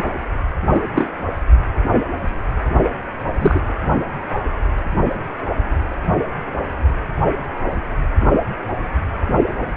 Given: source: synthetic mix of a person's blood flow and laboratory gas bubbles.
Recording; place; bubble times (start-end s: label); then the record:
Doppler ultrasound of blood flow; precordium
0.73-0.81 s: bubbles
0.94-1.08 s: bubbles
3.39-3.60 s: bubbles
From the record:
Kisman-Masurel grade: 123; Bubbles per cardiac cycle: 1 to 2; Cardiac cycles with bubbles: 10 to 50%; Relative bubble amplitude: loud (0.450 to 0.775); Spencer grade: 2 (many but less than half of the cardiac periods contain bubble signals, singularly or in groups); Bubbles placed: only in the low amplitude regions of the cardiac cycle